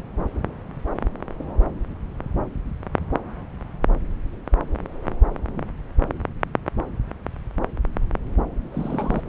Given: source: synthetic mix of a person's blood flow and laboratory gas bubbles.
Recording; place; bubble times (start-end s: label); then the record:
Doppler ultrasound of blood flow; subclavian vein
8.72-9.21 s: bubbles
From the record:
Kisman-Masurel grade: 211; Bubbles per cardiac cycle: several, 3 to 8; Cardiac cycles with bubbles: 1 to 10%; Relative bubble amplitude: barely perceptible (0.100 to 0.250); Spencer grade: 1 (occasional bubble signal discernible with the cardiac motion signal, with majority of cardiac periods free of bubbles); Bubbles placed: anywhere in the cardiac cycle